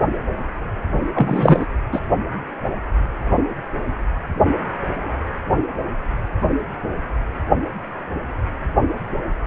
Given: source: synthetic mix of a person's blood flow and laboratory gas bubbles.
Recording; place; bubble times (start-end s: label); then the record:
Doppler ultrasound of blood flow; precordium
1.15-1.67 s: bubbles
1.92-1.99 s: bubbles
From the record:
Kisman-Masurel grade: 213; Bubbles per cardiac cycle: several, 3 to 8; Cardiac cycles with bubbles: 1 to 10%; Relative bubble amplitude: loud (0.450 to 0.775); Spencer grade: 1 (occasional bubble signal discernible with the cardiac motion signal, with majority of cardiac periods free of bubbles); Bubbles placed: only in the low amplitude regions of the cardiac cycle